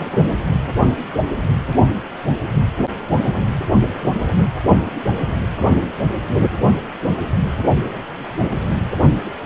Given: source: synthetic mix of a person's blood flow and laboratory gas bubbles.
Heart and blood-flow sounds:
Doppler ultrasound of blood flow; precordium
0.00-0.32 s: bubbles
0.54-0.62 s: bubbles
From the record:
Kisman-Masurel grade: 211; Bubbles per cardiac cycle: several, 3 to 8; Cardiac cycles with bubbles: 1 to 10%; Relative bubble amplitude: barely perceptible (0.100 to 0.250); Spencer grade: 1 (occasional bubble signal discernible with the cardiac motion signal, with majority of cardiac periods free of bubbles); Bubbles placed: only in the low amplitude regions of the cardiac cycle

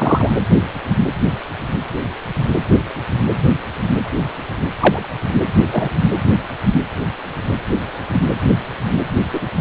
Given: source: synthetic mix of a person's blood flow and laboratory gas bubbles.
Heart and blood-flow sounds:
Doppler ultrasound of blood flow; precordium
0.00-0.30 s: bubbles
4.79-5.08 s: bubbles
5.71-5.89 s: bubbles
9.32-9.47 s: bubbles
From the record:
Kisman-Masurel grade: 123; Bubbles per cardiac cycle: 1 to 2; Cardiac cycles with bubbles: 10 to 50%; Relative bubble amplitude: loud (0.450 to 0.775); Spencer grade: 2 (many but less than half of the cardiac periods contain bubble signals, singularly or in groups); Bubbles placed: anywhere in the cardiac cycle

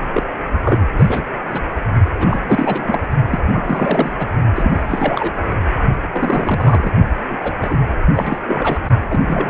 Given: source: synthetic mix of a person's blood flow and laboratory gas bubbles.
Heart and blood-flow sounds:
Doppler ultrasound of blood flow; precordium
0.13-0.23 s: bubbles
0.61-1.23 s: bubbles
1.51-1.62 s: bubbles
2.19-3.07 s: bubbles
3.27-3.40 s: bubbles
3.51-4.14 s: bubbles
4.18-4.28 s: bubbles
4.55-5.32 s: bubbles
6.12-6.92 s: bubbles
7.30-7.37 s: bubbles
7.40-7.54 s: bubbles
7.62-7.78 s: bubbles
8.16-8.37 s: bubbles
8.46-8.79 s: bubbles
9.08-9.21 s: bubbles
9.27-9.50 s: bubbles
From the record:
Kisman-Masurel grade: 342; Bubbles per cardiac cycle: rolling drumbeat, 9 or more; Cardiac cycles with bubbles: 100%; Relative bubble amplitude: moderate (0.250 to 0.450); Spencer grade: 3 (all of the cardiac periods contain showers or single bubble signals, but not dominating or overriding the cardiac motion signals); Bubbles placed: only in the low amplitude regions of the cardiac cycle

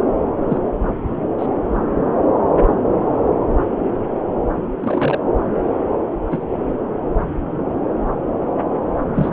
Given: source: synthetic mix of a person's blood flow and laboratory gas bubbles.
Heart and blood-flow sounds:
Doppler ultrasound of blood flow; subclavian vein
0.49-0.58 s: bubbles
1.39-1.46 s: bubbles
4.80-5.20 s: bubbles
6.30-6.47 s: bubbles
9.14-9.29 s: bubbles
From the record:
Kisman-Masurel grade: 122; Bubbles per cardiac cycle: 1 to 2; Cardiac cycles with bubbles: 10 to 50%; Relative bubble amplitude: moderate (0.250 to 0.450); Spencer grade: 2 (many but less than half of the cardiac periods contain bubble signals, singularly or in groups); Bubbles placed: anywhere in the cardiac cycle

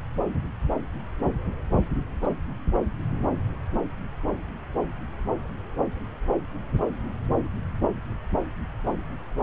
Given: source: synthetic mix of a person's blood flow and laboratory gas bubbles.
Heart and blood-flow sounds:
Doppler ultrasound of blood flow; subclavian vein
2.21-2.35 s: bubbles
From the record:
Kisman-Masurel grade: 111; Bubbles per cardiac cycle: 1 to 2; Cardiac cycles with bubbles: 1 to 10%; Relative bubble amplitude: barely perceptible (0.100 to 0.250); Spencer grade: 1 (occasional bubble signal discernible with the cardiac motion signal, with majority of cardiac periods free of bubbles); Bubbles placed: anywhere in the cardiac cycle

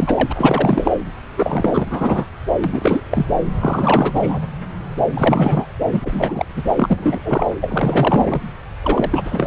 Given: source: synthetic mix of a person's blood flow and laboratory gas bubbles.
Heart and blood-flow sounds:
Doppler ultrasound of blood flow; subclavian vein
0.00-0.92 s: bubbles
1.37-1.87 s: bubbles
1.90-2.25 s: bubbles
2.64-3.02 s: bubbles
3.10-3.26 s: bubbles
3.59-4.12 s: bubbles
4.15-4.39 s: bubbles
5.13-5.67 s: bubbles
5.92-6.00 s: bubbles
6.03-6.46 s: bubbles
6.56-6.63 s: bubbles
6.78-7.50 s: bubbles
7.61-8.41 s: bubbles
8.81-9.46 s: bubbles
From the record:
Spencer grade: 3 (all of the cardiac periods contain showers or single bubble signals, but not dominating or overriding the cardiac motion signals); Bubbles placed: anywhere in the cardiac cycle

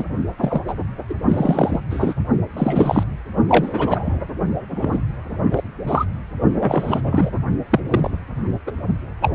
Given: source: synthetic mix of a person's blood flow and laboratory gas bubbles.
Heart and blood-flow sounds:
Doppler ultrasound of blood flow; precordium
0.00-0.04 s: bubbles
0.37-0.61 s: bubbles
0.67-0.73 s: bubbles
1.09-1.15 s: bubbles
1.28-1.80 s: bubbles
1.90-2.13 s: bubbles
2.56-3.03 s: bubbles
3.48-4.20 s: bubbles
4.71-5.01 s: bubbles
5.51-5.63 s: bubbles
5.87-6.05 s: bubbles
6.58-7.01 s: bubbles
7.04-7.30 s: bubbles
7.70-7.80 s: bubbles
7.90-8.18 s: bubbles
8.67-8.72 s: bubbles
9.22-9.33 s: bubbles
From the record:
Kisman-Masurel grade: 243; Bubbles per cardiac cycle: several, 3 to 8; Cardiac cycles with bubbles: 100%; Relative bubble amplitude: loud (0.450 to 0.775); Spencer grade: 3 (all of the cardiac periods contain showers or single bubble signals, but not dominating or overriding the cardiac motion signals); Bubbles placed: only in the low amplitude regions of the cardiac cycle

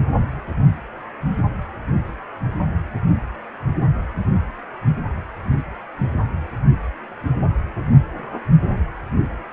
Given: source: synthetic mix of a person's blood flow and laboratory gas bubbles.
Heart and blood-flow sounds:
Doppler ultrasound of blood flow; precordium
no bubbles
From the record:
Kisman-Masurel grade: 000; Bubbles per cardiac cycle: 0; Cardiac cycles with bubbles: 0%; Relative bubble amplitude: no bubbles discernible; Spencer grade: 0 (complete lack of bubble signals)

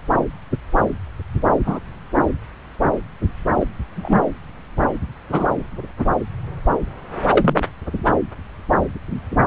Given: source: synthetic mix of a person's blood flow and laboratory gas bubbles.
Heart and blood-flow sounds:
Doppler ultrasound of blood flow; subclavian vein
1.66-1.79 s: bubbles
3.60-3.65 s: bubbles
3.96-4.19 s: bubbles
5.31-5.48 s: bubbles
7.29-7.57 s: bubbles
From the record:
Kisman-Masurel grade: 123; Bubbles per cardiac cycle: 1 to 2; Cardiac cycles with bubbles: 10 to 50%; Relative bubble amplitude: loud (0.450 to 0.775); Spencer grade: 2 (many but less than half of the cardiac periods contain bubble signals, singularly or in groups); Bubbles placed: anywhere in the cardiac cycle

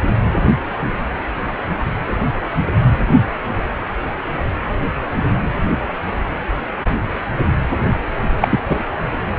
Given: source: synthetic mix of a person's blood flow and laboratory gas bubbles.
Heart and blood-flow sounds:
Doppler ultrasound of blood flow; precordium
8.42-8.60 s: bubbles
8.69-8.79 s: bubbles
From the record:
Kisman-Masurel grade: 213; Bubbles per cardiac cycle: several, 3 to 8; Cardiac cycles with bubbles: 1 to 10%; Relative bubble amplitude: loud (0.450 to 0.775); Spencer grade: 1 (occasional bubble signal discernible with the cardiac motion signal, with majority of cardiac periods free of bubbles); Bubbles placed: anywhere in the cardiac cycle

